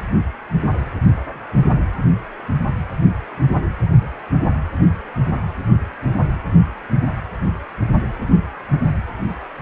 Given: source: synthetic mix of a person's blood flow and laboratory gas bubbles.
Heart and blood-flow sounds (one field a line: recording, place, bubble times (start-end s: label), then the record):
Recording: Doppler ultrasound of blood flow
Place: precordium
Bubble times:
no bubbles
From the record:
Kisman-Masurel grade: 000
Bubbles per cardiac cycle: 0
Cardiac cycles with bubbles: 0%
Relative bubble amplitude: no bubbles discernible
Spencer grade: 0 (complete lack of bubble signals)